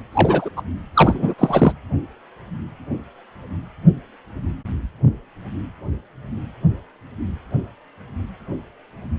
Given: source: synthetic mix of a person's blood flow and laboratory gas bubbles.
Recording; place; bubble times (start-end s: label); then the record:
Doppler ultrasound of blood flow; precordium
0.11-0.49 s: bubbles
0.56-0.62 s: bubbles
0.95-1.34 s: bubbles
1.38-1.73 s: bubbles
From the record:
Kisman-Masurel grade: 223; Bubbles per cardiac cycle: several, 3 to 8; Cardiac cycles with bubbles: 10 to 50%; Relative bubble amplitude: loud (0.450 to 0.775); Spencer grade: 2 (many but less than half of the cardiac periods contain bubble signals, singularly or in groups); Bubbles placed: anywhere in the cardiac cycle